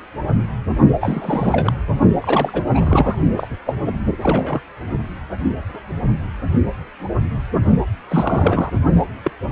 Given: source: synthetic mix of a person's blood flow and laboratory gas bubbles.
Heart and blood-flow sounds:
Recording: Doppler ultrasound of blood flow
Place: precordium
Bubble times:
1.00-1.73 s: bubbles
2.23-2.62 s: bubbles
2.73-3.17 s: bubbles
3.36-3.48 s: bubbles
3.66-3.98 s: bubbles
4.22-4.61 s: bubbles
8.10-8.70 s: bubbles
9.25-9.31 s: bubbles
From the record:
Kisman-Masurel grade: 332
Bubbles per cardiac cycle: rolling drumbeat, 9 or more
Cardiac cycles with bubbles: 50 to 99%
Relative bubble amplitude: moderate (0.250 to 0.450)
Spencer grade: 3 (all of the cardiac periods contain showers or single bubble signals, but not dominating or overriding the cardiac motion signals)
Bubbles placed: only in the low amplitude regions of the cardiac cycle

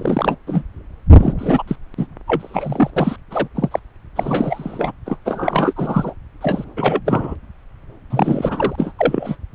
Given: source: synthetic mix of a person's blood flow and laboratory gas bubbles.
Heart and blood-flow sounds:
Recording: Doppler ultrasound of blood flow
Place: subclavian vein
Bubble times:
0.00-0.35 s: bubbles
0.47-0.63 s: bubbles
1.15-1.33 s: bubbles
1.39-1.62 s: bubbles
1.67-1.76 s: bubbles
1.97-2.06 s: bubbles
2.27-2.91 s: bubbles
2.96-3.16 s: bubbles
3.31-3.48 s: bubbles
3.54-3.79 s: bubbles
4.16-4.92 s: bubbles
5.06-5.17 s: bubbles
5.25-5.74 s: bubbles
5.76-6.13 s: bubbles
6.41-6.65 s: bubbles
6.76-7.00 s: bubbles
7.05-7.36 s: bubbles
8.10-8.92 s: bubbles
8.98-9.36 s: bubbles
From the record:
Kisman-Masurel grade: 343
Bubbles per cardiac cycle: rolling drumbeat, 9 or more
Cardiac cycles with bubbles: 100%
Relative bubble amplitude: loud (0.450 to 0.775)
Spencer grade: 3 (all of the cardiac periods contain showers or single bubble signals, but not dominating or overriding the cardiac motion signals)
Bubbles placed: anywhere in the cardiac cycle

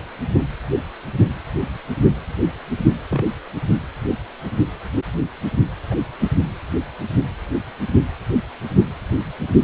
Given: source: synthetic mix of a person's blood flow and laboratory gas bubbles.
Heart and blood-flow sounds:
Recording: Doppler ultrasound of blood flow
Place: precordium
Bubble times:
3.09-3.25 s: bubbles
5.91-5.96 s: bubbles
6.20-6.29 s: bubbles
From the record:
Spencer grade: 2 (many but less than half of the cardiac periods contain bubble signals, singularly or in groups)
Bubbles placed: anywhere in the cardiac cycle

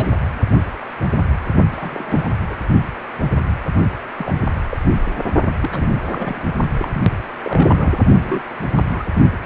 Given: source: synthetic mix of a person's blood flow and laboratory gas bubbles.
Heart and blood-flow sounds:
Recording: Doppler ultrasound of blood flow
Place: precordium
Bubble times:
0.00-0.10 s: bubbles
1.68-2.30 s: bubbles
2.48-2.55 s: bubbles
4.17-4.34 s: bubbles
4.70-4.77 s: bubbles
5.62-5.87 s: bubbles
6.10-6.40 s: bubbles
6.79-7.13 s: bubbles
7.42-8.00 s: bubbles
8.18-8.40 s: bubbles
8.75-8.83 s: bubbles
8.90-9.04 s: bubbles
From the record:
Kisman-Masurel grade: 232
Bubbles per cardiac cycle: several, 3 to 8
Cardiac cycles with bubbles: 50 to 99%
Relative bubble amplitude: moderate (0.250 to 0.450)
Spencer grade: 3 (all of the cardiac periods contain showers or single bubble signals, but not dominating or overriding the cardiac motion signals)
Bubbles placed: only in the low amplitude regions of the cardiac cycle

